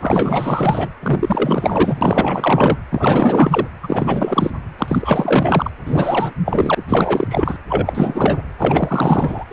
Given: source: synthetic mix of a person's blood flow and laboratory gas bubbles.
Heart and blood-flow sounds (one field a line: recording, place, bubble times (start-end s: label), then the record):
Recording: Doppler ultrasound of blood flow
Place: precordium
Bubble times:
0.00-0.89 s: bubbles
1.02-2.77 s: bubbles
2.90-3.68 s: bubbles
3.83-4.51 s: bubbles
4.78-5.71 s: bubbles
5.85-6.33 s: bubbles
6.46-6.83 s: bubbles
6.88-7.58 s: bubbles
7.68-8.41 s: bubbles
8.58-9.45 s: bubbles
9.50-9.52 s: bubbles
From the record:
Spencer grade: 4 (maximum detectable bubble signal sounding continuously throughout systole and diastole of every cardiac period, and overriding the amplitude of the normal cardiac signals)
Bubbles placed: anywhere in the cardiac cycle